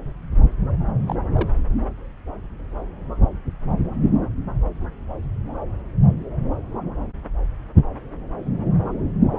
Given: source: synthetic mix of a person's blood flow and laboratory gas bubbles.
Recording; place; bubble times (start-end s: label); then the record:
Doppler ultrasound of blood flow; subclavian vein
1.07-1.16 s: bubbles
1.33-1.51 s: bubbles
From the record:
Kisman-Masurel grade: 111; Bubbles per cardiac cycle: 1 to 2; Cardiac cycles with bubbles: 1 to 10%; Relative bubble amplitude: barely perceptible (0.100 to 0.250); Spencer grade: 1 (occasional bubble signal discernible with the cardiac motion signal, with majority of cardiac periods free of bubbles); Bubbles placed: anywhere in the cardiac cycle